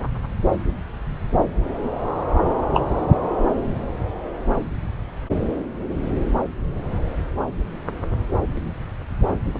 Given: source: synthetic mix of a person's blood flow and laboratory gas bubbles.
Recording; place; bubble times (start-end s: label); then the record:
Doppler ultrasound of blood flow; subclavian vein
2.73-2.83 s: bubbles
From the record:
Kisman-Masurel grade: 113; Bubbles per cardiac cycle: 1 to 2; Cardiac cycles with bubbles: 1 to 10%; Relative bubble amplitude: loud (0.450 to 0.775); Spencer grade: 1 (occasional bubble signal discernible with the cardiac motion signal, with majority of cardiac periods free of bubbles); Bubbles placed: anywhere in the cardiac cycle